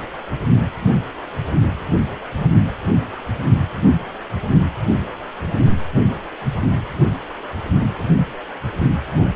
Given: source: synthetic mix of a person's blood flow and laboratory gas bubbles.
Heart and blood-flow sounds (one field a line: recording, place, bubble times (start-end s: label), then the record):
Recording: Doppler ultrasound of blood flow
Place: precordium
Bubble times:
7.42-7.46 s: bubbles
7.80-8.07 s: bubbles
From the record:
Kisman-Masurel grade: 121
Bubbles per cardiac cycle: 1 to 2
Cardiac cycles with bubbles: 10 to 50%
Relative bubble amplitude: barely perceptible (0.100 to 0.250)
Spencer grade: 2 (many but less than half of the cardiac periods contain bubble signals, singularly or in groups)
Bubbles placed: only in the low amplitude regions of the cardiac cycle